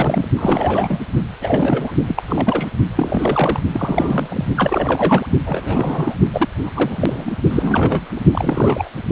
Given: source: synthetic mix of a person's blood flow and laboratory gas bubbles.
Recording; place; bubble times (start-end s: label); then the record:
Doppler ultrasound of blood flow; precordium
0.00-0.28 s: bubbles
0.36-0.99 s: bubbles
1.41-1.91 s: bubbles
2.06-2.23 s: bubbles
2.27-2.69 s: bubbles
2.96-3.60 s: bubbles
3.73-4.45 s: bubbles
4.57-5.26 s: bubbles
5.46-6.16 s: bubbles
6.33-6.48 s: bubbles
6.62-7.36 s: bubbles
7.50-8.12 s: bubbles
8.16-8.20 s: bubbles
8.31-8.89 s: bubbles
From the record:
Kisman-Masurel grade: 332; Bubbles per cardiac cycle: rolling drumbeat, 9 or more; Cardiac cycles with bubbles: 50 to 99%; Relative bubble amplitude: moderate (0.250 to 0.450); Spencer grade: 3 (all of the cardiac periods contain showers or single bubble signals, but not dominating or overriding the cardiac motion signals); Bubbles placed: only in the low amplitude regions of the cardiac cycle